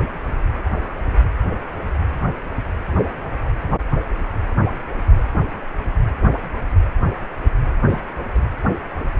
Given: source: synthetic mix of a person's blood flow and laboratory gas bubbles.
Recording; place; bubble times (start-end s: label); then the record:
Doppler ultrasound of blood flow; precordium
7.88-8.01 s: bubbles
8.34-8.39 s: bubbles
From the record:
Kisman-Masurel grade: 212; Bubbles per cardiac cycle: several, 3 to 8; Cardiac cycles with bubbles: 1 to 10%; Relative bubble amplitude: moderate (0.250 to 0.450); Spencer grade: 1 (occasional bubble signal discernible with the cardiac motion signal, with majority of cardiac periods free of bubbles); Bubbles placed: anywhere in the cardiac cycle